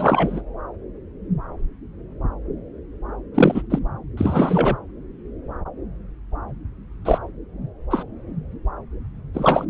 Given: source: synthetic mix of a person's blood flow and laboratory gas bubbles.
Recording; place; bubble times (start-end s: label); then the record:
Doppler ultrasound of blood flow; subclavian vein
0.00-0.41 s: bubbles
3.34-3.62 s: bubbles
3.70-3.79 s: bubbles
4.17-4.78 s: bubbles
7.05-7.18 s: bubbles
7.91-8.04 s: bubbles
9.34-9.65 s: bubbles
From the record:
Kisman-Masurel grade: 233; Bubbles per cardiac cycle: several, 3 to 8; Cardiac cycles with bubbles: 50 to 99%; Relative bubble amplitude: loud (0.450 to 0.775); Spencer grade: 3 (all of the cardiac periods contain showers or single bubble signals, but not dominating or overriding the cardiac motion signals); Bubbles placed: anywhere in the cardiac cycle